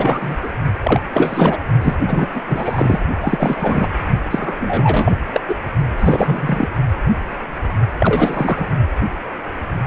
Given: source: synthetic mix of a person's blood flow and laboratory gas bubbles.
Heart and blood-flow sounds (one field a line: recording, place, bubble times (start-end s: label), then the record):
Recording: Doppler ultrasound of blood flow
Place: precordium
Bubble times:
0.00-0.37 s: bubbles
0.43-0.49 s: bubbles
0.82-1.01 s: bubbles
1.12-1.58 s: bubbles
1.81-1.95 s: bubbles
2.06-2.28 s: bubbles
2.34-3.00 s: bubbles
3.21-3.89 s: bubbles
4.30-5.16 s: bubbles
5.33-5.40 s: bubbles
5.48-5.56 s: bubbles
5.96-6.68 s: bubbles
7.99-8.68 s: bubbles
From the record:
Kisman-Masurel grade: 333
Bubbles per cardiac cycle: rolling drumbeat, 9 or more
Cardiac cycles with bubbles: 50 to 99%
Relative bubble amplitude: loud (0.450 to 0.775)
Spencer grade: 3 (all of the cardiac periods contain showers or single bubble signals, but not dominating or overriding the cardiac motion signals)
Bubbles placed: only in the low amplitude regions of the cardiac cycle